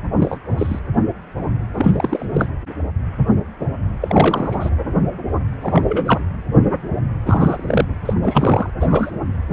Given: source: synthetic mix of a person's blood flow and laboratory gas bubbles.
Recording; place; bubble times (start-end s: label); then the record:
Doppler ultrasound of blood flow; precordium
0.18-0.38 s: bubbles
0.57-0.79 s: bubbles
1.76-2.26 s: bubbles
2.33-2.50 s: bubbles
4.00-4.70 s: bubbles
5.61-5.82 s: bubbles
5.88-6.21 s: bubbles
7.26-7.85 s: bubbles
8.05-8.13 s: bubbles
8.22-8.70 s: bubbles
8.80-9.11 s: bubbles
From the record:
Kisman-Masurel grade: 232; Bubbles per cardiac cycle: several, 3 to 8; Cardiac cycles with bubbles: 50 to 99%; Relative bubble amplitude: moderate (0.250 to 0.450); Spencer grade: 3 (all of the cardiac periods contain showers or single bubble signals, but not dominating or overriding the cardiac motion signals); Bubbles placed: anywhere in the cardiac cycle